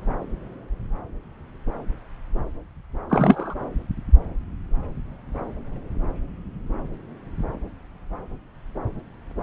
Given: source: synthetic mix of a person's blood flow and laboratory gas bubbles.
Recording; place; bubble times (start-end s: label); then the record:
Doppler ultrasound of blood flow; subclavian vein
3.09-3.54 s: bubbles
From the record:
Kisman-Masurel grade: 212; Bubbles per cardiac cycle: several, 3 to 8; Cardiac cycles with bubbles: 1 to 10%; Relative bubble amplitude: moderate (0.250 to 0.450); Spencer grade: 1 (occasional bubble signal discernible with the cardiac motion signal, with majority of cardiac periods free of bubbles); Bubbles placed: anywhere in the cardiac cycle